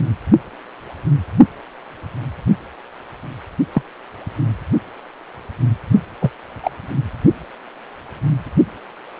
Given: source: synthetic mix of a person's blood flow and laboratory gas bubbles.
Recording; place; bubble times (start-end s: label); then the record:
Doppler ultrasound of blood flow; precordium
3.74-3.82 s: bubbles
6.21-6.31 s: bubbles
6.63-6.71 s: bubbles
From the record:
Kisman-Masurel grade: 123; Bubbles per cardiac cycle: 1 to 2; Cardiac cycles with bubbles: 10 to 50%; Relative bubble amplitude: loud (0.450 to 0.775); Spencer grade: 2 (many but less than half of the cardiac periods contain bubble signals, singularly or in groups); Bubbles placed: only in the low amplitude regions of the cardiac cycle